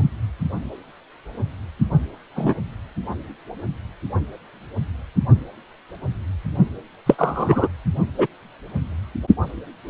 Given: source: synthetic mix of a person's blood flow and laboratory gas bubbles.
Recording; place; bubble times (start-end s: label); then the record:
Doppler ultrasound of blood flow; precordium
2.36-2.55 s: bubbles
7.06-7.15 s: bubbles
7.18-7.68 s: bubbles
8.18-8.27 s: bubbles
From the record:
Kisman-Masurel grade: 123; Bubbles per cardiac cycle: 1 to 2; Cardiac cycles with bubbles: 10 to 50%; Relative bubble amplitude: loud (0.450 to 0.775); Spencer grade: 2 (many but less than half of the cardiac periods contain bubble signals, singularly or in groups); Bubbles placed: only in the low amplitude regions of the cardiac cycle